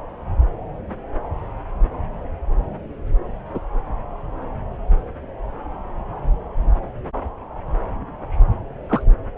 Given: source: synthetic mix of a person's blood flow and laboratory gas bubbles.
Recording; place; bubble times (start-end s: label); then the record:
Doppler ultrasound of blood flow; subclavian vein
3.54-3.59 s: bubbles
8.90-9.02 s: bubbles
From the record:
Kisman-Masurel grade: 122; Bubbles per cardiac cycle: 1 to 2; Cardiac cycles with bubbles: 10 to 50%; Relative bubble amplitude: moderate (0.250 to 0.450); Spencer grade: 2 (many but less than half of the cardiac periods contain bubble signals, singularly or in groups); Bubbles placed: anywhere in the cardiac cycle